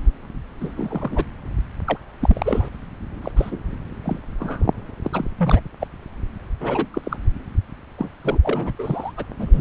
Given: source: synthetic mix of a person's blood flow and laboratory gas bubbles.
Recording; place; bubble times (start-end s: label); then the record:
Doppler ultrasound of blood flow; subclavian vein
0.60-0.71 s: bubbles
0.76-1.25 s: bubbles
1.86-1.97 s: bubbles
2.20-2.69 s: bubbles
3.21-3.32 s: bubbles
3.35-3.59 s: bubbles
4.04-4.19 s: bubbles
4.39-4.67 s: bubbles
5.02-5.27 s: bubbles
5.38-5.60 s: bubbles
5.80-5.87 s: bubbles
6.60-6.86 s: bubbles
6.93-7.17 s: bubbles
7.98-8.09 s: bubbles
8.23-8.38 s: bubbles
8.43-8.72 s: bubbles
8.79-9.12 s: bubbles
9.17-9.25 s: bubbles
9.39-9.61 s: bubbles
From the record:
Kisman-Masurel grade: 242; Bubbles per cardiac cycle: several, 3 to 8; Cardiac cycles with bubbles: 100%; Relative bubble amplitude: moderate (0.250 to 0.450); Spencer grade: 3 (all of the cardiac periods contain showers or single bubble signals, but not dominating or overriding the cardiac motion signals); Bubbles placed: anywhere in the cardiac cycle